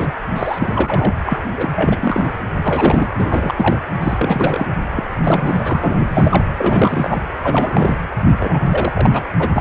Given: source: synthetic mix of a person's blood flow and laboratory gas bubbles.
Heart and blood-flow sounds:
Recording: Doppler ultrasound of blood flow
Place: precordium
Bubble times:
0.00-0.13 s: bubbles
0.36-1.14 s: bubbles
1.26-1.38 s: bubbles
1.57-1.70 s: bubbles
1.76-2.25 s: bubbles
2.64-3.09 s: bubbles
3.19-3.54 s: bubbles
3.57-3.79 s: bubbles
3.99-4.66 s: bubbles
4.96-5.03 s: bubbles
5.24-5.99 s: bubbles
6.09-6.45 s: bubbles
6.58-7.26 s: bubbles
7.43-7.97 s: bubbles
8.40-8.59 s: bubbles
8.70-9.10 s: bubbles
9.12-9.21 s: bubbles
9.38-9.48 s: bubbles
9.56-9.61 s: bubbles
From the record:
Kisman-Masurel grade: 342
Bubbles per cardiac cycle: rolling drumbeat, 9 or more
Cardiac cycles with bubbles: 100%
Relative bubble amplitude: moderate (0.250 to 0.450)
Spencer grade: 3 (all of the cardiac periods contain showers or single bubble signals, but not dominating or overriding the cardiac motion signals)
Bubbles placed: anywhere in the cardiac cycle

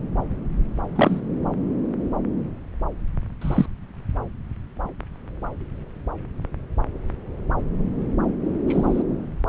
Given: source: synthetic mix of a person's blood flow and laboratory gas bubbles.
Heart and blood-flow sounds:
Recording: Doppler ultrasound of blood flow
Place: subclavian vein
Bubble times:
0.95-1.21 s: bubbles
3.41-3.66 s: bubbles
8.67-9.03 s: bubbles
From the record:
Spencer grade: 2 (many but less than half of the cardiac periods contain bubble signals, singularly or in groups)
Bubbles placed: anywhere in the cardiac cycle

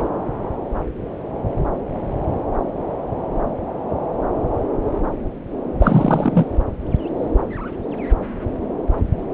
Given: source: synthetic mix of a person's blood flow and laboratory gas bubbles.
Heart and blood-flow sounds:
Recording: Doppler ultrasound of blood flow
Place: subclavian vein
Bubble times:
5.79-6.46 s: bubbles
From the record:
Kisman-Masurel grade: 213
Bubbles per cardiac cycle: several, 3 to 8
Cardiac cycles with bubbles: 1 to 10%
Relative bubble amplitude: loud (0.450 to 0.775)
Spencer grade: 1 (occasional bubble signal discernible with the cardiac motion signal, with majority of cardiac periods free of bubbles)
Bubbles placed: anywhere in the cardiac cycle

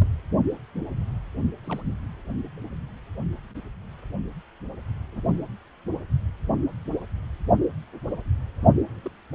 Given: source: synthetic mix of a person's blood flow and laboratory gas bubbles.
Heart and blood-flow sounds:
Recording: Doppler ultrasound of blood flow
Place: precordium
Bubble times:
0.01-0.08 s: bubbles
1.64-1.83 s: bubbles
5.12-5.21 s: bubbles
8.07-8.19 s: bubbles
9.03-9.10 s: bubbles
From the record:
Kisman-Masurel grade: 121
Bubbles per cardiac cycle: 1 to 2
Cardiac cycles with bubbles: 10 to 50%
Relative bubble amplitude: barely perceptible (0.100 to 0.250)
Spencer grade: 2 (many but less than half of the cardiac periods contain bubble signals, singularly or in groups)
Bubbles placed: only in the low amplitude regions of the cardiac cycle

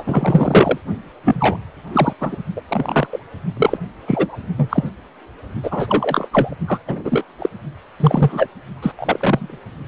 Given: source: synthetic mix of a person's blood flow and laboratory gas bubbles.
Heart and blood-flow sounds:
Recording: Doppler ultrasound of blood flow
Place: precordium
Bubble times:
0.00-0.78 s: bubbles
1.24-1.57 s: bubbles
1.93-2.13 s: bubbles
2.20-2.36 s: bubbles
2.56-2.61 s: bubbles
2.68-3.08 s: bubbles
3.12-3.20 s: bubbles
3.57-3.78 s: bubbles
4.06-4.38 s: bubbles
4.56-4.89 s: bubbles
5.63-6.28 s: bubbles
6.30-6.55 s: bubbles
6.67-6.79 s: bubbles
6.88-7.25 s: bubbles
7.38-7.50 s: bubbles
8.00-8.48 s: bubbles
8.82-8.92 s: bubbles
8.99-9.59 s: bubbles
From the record:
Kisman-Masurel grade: 243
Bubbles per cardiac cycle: several, 3 to 8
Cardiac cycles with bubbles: 100%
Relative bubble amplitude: loud (0.450 to 0.775)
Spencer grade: 3 (all of the cardiac periods contain showers or single bubble signals, but not dominating or overriding the cardiac motion signals)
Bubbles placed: only in the low amplitude regions of the cardiac cycle

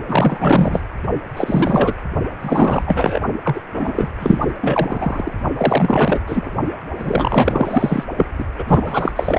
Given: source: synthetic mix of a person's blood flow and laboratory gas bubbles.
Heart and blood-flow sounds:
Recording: Doppler ultrasound of blood flow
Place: precordium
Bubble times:
0.09-0.81 s: bubbles
1.36-1.94 s: bubbles
2.40-3.20 s: bubbles
3.44-3.60 s: bubbles
3.73-4.12 s: bubbles
4.20-4.49 s: bubbles
4.61-5.33 s: bubbles
5.57-6.20 s: bubbles
6.26-6.51 s: bubbles
6.97-8.04 s: bubbles
8.16-8.26 s: bubbles
8.38-8.45 s: bubbles
8.58-8.64 s: bubbles
8.68-9.12 s: bubbles
9.15-9.39 s: bubbles
From the record:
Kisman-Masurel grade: 444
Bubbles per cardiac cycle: continuous sound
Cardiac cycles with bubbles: 100%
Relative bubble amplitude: maximal (0.775 to 0.999)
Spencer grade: 4 (maximum detectable bubble signal sounding continuously throughout systole and diastole of every cardiac period, and overriding the amplitude of the normal cardiac signals)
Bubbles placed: only in the low amplitude regions of the cardiac cycle

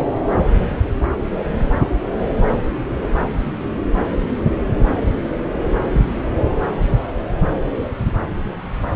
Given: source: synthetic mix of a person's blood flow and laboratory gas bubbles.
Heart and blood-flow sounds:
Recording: Doppler ultrasound of blood flow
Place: subclavian vein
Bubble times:
no bubbles
From the record:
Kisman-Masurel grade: 000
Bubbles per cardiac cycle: 0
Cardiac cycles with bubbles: 0%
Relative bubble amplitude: no bubbles discernible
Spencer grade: 0 (complete lack of bubble signals)

